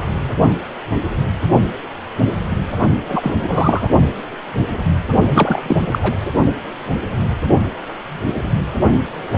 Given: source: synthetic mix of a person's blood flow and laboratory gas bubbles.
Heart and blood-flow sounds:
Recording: Doppler ultrasound of blood flow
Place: precordium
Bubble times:
3.08-3.33 s: bubbles
3.48-3.89 s: bubbles
5.34-5.62 s: bubbles
5.66-5.77 s: bubbles
5.91-6.16 s: bubbles
From the record:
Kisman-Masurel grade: 223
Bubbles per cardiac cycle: several, 3 to 8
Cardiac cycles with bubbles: 10 to 50%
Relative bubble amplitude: loud (0.450 to 0.775)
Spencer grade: 2 (many but less than half of the cardiac periods contain bubble signals, singularly or in groups)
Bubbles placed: only in the low amplitude regions of the cardiac cycle

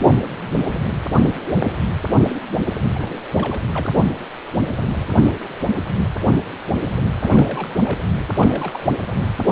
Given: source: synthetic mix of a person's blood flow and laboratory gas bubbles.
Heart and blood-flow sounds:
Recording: Doppler ultrasound of blood flow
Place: precordium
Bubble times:
1.16-1.34 s: bubbles
2.90-3.13 s: bubbles
3.16-3.21 s: bubbles
3.35-3.64 s: bubbles
3.72-4.04 s: bubbles
7.18-7.73 s: bubbles
7.83-7.98 s: bubbles
8.38-8.79 s: bubbles
From the record:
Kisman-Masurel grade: 221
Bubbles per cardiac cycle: several, 3 to 8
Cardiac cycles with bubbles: 10 to 50%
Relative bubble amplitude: barely perceptible (0.100 to 0.250)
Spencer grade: 2 (many but less than half of the cardiac periods contain bubble signals, singularly or in groups)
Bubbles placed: anywhere in the cardiac cycle

